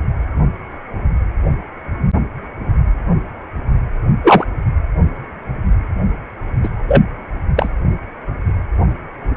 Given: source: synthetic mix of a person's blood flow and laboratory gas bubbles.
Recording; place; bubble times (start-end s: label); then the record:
Doppler ultrasound of blood flow; precordium
4.24-4.45 s: bubbles
6.63-6.69 s: bubbles
6.88-7.03 s: bubbles
7.57-7.70 s: bubbles
From the record:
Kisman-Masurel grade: 123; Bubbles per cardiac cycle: 1 to 2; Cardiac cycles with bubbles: 10 to 50%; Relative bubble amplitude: loud (0.450 to 0.775); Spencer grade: 2 (many but less than half of the cardiac periods contain bubble signals, singularly or in groups); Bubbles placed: anywhere in the cardiac cycle